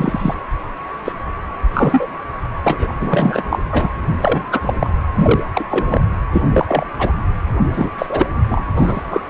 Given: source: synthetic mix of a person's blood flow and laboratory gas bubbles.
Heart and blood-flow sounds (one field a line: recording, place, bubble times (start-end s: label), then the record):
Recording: Doppler ultrasound of blood flow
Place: precordium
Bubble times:
0.00-0.34 s: bubbles
1.04-1.12 s: bubbles
1.73-2.07 s: bubbles
2.63-2.92 s: bubbles
3.00-3.43 s: bubbles
3.50-3.59 s: bubbles
3.71-3.90 s: bubbles
4.07-4.47 s: bubbles
4.52-4.74 s: bubbles
4.79-4.90 s: bubbles
5.15-5.44 s: bubbles
5.54-5.64 s: bubbles
5.71-6.02 s: bubbles
6.32-6.42 s: bubbles
6.51-6.65 s: bubbles
6.68-6.85 s: bubbles
6.99-7.12 s: bubbles
7.73-7.89 s: bubbles
7.98-8.06 s: bubbles
8.09-8.27 s: bubbles
8.48-8.65 s: bubbles
8.77-9.03 s: bubbles
9.10-9.22 s: bubbles
From the record:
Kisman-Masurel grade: 243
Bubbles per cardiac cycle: several, 3 to 8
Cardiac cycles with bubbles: 100%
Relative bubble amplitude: loud (0.450 to 0.775)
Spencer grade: 3 (all of the cardiac periods contain showers or single bubble signals, but not dominating or overriding the cardiac motion signals)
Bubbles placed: anywhere in the cardiac cycle